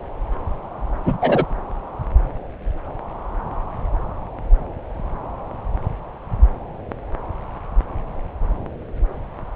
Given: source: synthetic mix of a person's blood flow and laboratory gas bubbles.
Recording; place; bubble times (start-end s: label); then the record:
Doppler ultrasound of blood flow; subclavian vein
1.04-1.17 s: bubbles
1.21-1.45 s: bubbles
From the record:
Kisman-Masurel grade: 113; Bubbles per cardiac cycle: 1 to 2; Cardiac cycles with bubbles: 1 to 10%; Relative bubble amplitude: loud (0.450 to 0.775); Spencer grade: 1 (occasional bubble signal discernible with the cardiac motion signal, with majority of cardiac periods free of bubbles); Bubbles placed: anywhere in the cardiac cycle